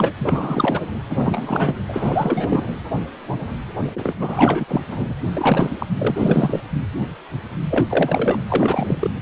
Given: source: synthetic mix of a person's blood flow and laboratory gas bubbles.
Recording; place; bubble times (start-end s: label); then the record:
Doppler ultrasound of blood flow; precordium
0.00-0.13 s: bubbles
0.19-0.80 s: bubbles
1.09-1.75 s: bubbles
1.88-2.73 s: bubbles
3.95-4.14 s: bubbles
4.19-4.81 s: bubbles
4.88-5.14 s: bubbles
5.37-5.86 s: bubbles
5.98-6.62 s: bubbles
7.70-7.85 s: bubbles
7.89-8.41 s: bubbles
8.48-9.11 s: bubbles
From the record:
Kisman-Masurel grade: 333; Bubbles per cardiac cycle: rolling drumbeat, 9 or more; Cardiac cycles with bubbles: 50 to 99%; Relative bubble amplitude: loud (0.450 to 0.775); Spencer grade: 3 (all of the cardiac periods contain showers or single bubble signals, but not dominating or overriding the cardiac motion signals); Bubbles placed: anywhere in the cardiac cycle